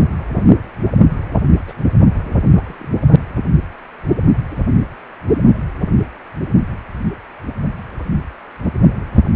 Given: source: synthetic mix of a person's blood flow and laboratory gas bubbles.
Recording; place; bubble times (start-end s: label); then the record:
Doppler ultrasound of blood flow; precordium
1.64-1.73 s: bubbles
1.79-1.83 s: bubbles
1.97-2.04 s: bubbles
2.27-2.34 s: bubbles
2.54-2.75 s: bubbles
2.79-2.88 s: bubbles
From the record:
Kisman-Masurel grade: 211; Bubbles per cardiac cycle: several, 3 to 8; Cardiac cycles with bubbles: 1 to 10%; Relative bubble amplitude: barely perceptible (0.100 to 0.250); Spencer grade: 1 (occasional bubble signal discernible with the cardiac motion signal, with majority of cardiac periods free of bubbles); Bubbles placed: only in the low amplitude regions of the cardiac cycle